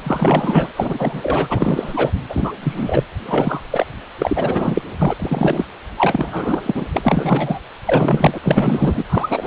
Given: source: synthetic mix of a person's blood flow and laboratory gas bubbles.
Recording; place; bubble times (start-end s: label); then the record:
Doppler ultrasound of blood flow; precordium
0.03-0.68 s: bubbles
0.76-2.11 s: bubbles
2.29-2.52 s: bubbles
2.61-3.03 s: bubbles
3.25-3.61 s: bubbles
3.70-3.86 s: bubbles
4.19-4.82 s: bubbles
4.98-5.66 s: bubbles
5.97-6.62 s: bubbles
6.66-6.85 s: bubbles
6.93-7.58 s: bubbles
7.85-8.38 s: bubbles
8.42-9.03 s: bubbles
9.09-9.46 s: bubbles
From the record:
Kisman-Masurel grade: 343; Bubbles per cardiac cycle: rolling drumbeat, 9 or more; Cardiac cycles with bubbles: 100%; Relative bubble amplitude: loud (0.450 to 0.775); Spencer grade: 3 (all of the cardiac periods contain showers or single bubble signals, but not dominating or overriding the cardiac motion signals); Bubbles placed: anywhere in the cardiac cycle